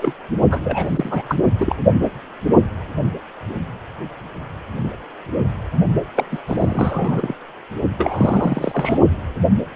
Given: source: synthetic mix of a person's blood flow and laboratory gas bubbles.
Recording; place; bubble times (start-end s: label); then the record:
Doppler ultrasound of blood flow; precordium
0.00-0.14 s: bubbles
0.50-1.42 s: bubbles
1.58-1.75 s: bubbles
6.16-6.26 s: bubbles
6.31-6.38 s: bubbles
6.46-7.35 s: bubbles
7.98-8.99 s: bubbles
From the record:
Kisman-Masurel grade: 332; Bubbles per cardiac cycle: rolling drumbeat, 9 or more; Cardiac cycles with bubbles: 50 to 99%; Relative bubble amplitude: moderate (0.250 to 0.450); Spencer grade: 3 (all of the cardiac periods contain showers or single bubble signals, but not dominating or overriding the cardiac motion signals); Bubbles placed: only in the low amplitude regions of the cardiac cycle